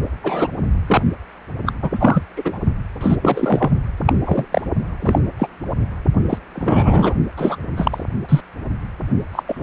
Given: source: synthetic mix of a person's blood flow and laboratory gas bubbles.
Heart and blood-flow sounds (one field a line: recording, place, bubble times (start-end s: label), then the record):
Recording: Doppler ultrasound of blood flow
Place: precordium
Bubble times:
0.23-0.48 s: bubbles
0.86-1.02 s: bubbles
1.66-1.72 s: bubbles
1.82-1.89 s: bubbles
1.93-2.23 s: bubbles
2.36-2.58 s: bubbles
3.01-3.17 s: bubbles
3.22-3.71 s: bubbles
4.05-4.13 s: bubbles
4.25-4.45 s: bubbles
4.52-4.62 s: bubbles
5.02-5.19 s: bubbles
5.38-5.48 s: bubbles
6.29-6.38 s: bubbles
6.55-7.15 s: bubbles
7.37-7.57 s: bubbles
7.77-8.04 s: bubbles
8.29-8.40 s: bubbles
9.32-9.43 s: bubbles
9.46-9.62 s: bubbles
From the record:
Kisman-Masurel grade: 243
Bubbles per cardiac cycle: several, 3 to 8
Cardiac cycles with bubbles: 100%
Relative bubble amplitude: loud (0.450 to 0.775)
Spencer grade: 3 (all of the cardiac periods contain showers or single bubble signals, but not dominating or overriding the cardiac motion signals)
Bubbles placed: only in the low amplitude regions of the cardiac cycle